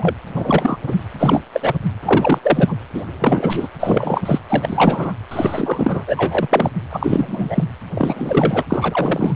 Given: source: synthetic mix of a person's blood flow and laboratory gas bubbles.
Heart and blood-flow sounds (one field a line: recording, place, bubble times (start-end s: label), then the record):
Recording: Doppler ultrasound of blood flow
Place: precordium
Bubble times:
0.00-0.14 s: bubbles
0.36-0.78 s: bubbles
0.86-0.95 s: bubbles
1.19-1.42 s: bubbles
1.52-1.77 s: bubbles
2.02-2.38 s: bubbles
2.42-2.75 s: bubbles
2.94-3.04 s: bubbles
3.19-3.69 s: bubbles
3.79-4.21 s: bubbles
4.25-4.39 s: bubbles
4.49-5.13 s: bubbles
5.31-6.04 s: bubbles
6.07-6.71 s: bubbles
6.89-7.64 s: bubbles
7.94-8.64 s: bubbles
8.70-9.34 s: bubbles
From the record:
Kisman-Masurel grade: 333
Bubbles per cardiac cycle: rolling drumbeat, 9 or more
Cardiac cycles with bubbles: 50 to 99%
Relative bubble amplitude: loud (0.450 to 0.775)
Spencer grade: 3 (all of the cardiac periods contain showers or single bubble signals, but not dominating or overriding the cardiac motion signals)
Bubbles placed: anywhere in the cardiac cycle